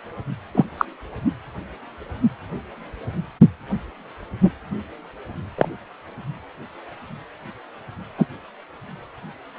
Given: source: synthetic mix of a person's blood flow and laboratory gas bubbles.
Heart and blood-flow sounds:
Doppler ultrasound of blood flow; precordium
0.54-0.65 s: bubbles
0.78-0.85 s: bubbles
5.58-5.68 s: bubbles
8.18-8.26 s: bubbles
From the record:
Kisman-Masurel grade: 123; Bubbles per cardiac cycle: 1 to 2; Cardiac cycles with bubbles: 10 to 50%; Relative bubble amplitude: loud (0.450 to 0.775); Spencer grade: 2 (many but less than half of the cardiac periods contain bubble signals, singularly or in groups); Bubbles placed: anywhere in the cardiac cycle

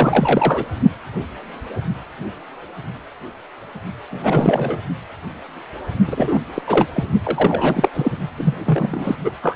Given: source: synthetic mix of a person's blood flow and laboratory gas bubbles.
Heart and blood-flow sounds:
Doppler ultrasound of blood flow; precordium
0.00-0.65 s: bubbles
4.11-4.79 s: bubbles
6.07-6.39 s: bubbles
6.55-6.62 s: bubbles
6.67-6.87 s: bubbles
6.93-7.04 s: bubbles
7.24-7.89 s: bubbles
7.93-8.12 s: bubbles
8.37-8.54 s: bubbles
8.65-9.16 s: bubbles
9.24-9.32 s: bubbles
9.42-9.56 s: bubbles
From the record:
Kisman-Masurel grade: 333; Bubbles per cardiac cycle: rolling drumbeat, 9 or more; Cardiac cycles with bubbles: 50 to 99%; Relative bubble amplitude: loud (0.450 to 0.775); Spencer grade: 3 (all of the cardiac periods contain showers or single bubble signals, but not dominating or overriding the cardiac motion signals); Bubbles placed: only in the low amplitude regions of the cardiac cycle

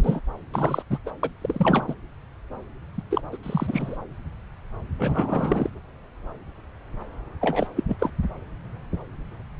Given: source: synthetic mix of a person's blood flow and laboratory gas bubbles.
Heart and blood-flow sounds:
Doppler ultrasound of blood flow; subclavian vein
0.00-0.20 s: bubbles
0.54-0.82 s: bubbles
0.90-0.98 s: bubbles
1.06-1.11 s: bubbles
1.23-1.29 s: bubbles
1.42-1.95 s: bubbles
2.98-3.02 s: bubbles
3.10-3.21 s: bubbles
3.32-3.37 s: bubbles
3.43-3.96 s: bubbles
4.99-5.70 s: bubbles
7.41-7.67 s: bubbles
7.75-7.83 s: bubbles
7.88-8.10 s: bubbles
From the record:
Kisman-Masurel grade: 222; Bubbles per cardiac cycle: several, 3 to 8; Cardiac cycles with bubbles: 10 to 50%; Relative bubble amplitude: moderate (0.250 to 0.450); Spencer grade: 2 (many but less than half of the cardiac periods contain bubble signals, singularly or in groups); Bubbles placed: anywhere in the cardiac cycle

